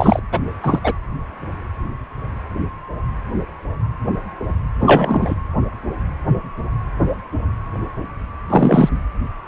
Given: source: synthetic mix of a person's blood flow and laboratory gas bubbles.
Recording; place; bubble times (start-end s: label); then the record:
Doppler ultrasound of blood flow; precordium
0.00-0.19 s: bubbles
0.31-0.40 s: bubbles
0.63-0.79 s: bubbles
0.83-0.92 s: bubbles
4.79-5.36 s: bubbles
8.50-8.89 s: bubbles
From the record:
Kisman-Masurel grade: 223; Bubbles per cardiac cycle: several, 3 to 8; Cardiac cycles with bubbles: 10 to 50%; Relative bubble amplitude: loud (0.450 to 0.775); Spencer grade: 2 (many but less than half of the cardiac periods contain bubble signals, singularly or in groups); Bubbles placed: anywhere in the cardiac cycle